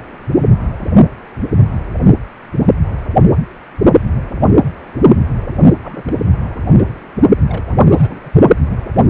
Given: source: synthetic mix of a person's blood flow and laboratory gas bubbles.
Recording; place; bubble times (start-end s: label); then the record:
Doppler ultrasound of blood flow; precordium
5.59-5.64 s: bubbles
5.82-6.03 s: bubbles
6.06-6.11 s: bubbles
6.78-6.92 s: bubbles
7.48-7.65 s: bubbles
7.68-8.30 s: bubbles
From the record:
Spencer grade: 2 (many but less than half of the cardiac periods contain bubble signals, singularly or in groups); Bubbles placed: only in the low amplitude regions of the cardiac cycle